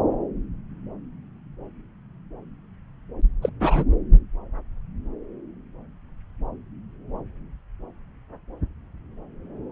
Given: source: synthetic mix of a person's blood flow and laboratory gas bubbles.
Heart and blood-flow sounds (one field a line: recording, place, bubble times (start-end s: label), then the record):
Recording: Doppler ultrasound of blood flow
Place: subclavian vein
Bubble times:
3.42-3.50 s: bubbles
3.60-3.84 s: bubbles
From the record:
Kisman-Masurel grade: 112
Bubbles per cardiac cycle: 1 to 2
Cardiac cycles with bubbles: 1 to 10%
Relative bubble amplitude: moderate (0.250 to 0.450)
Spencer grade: 1 (occasional bubble signal discernible with the cardiac motion signal, with majority of cardiac periods free of bubbles)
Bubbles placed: anywhere in the cardiac cycle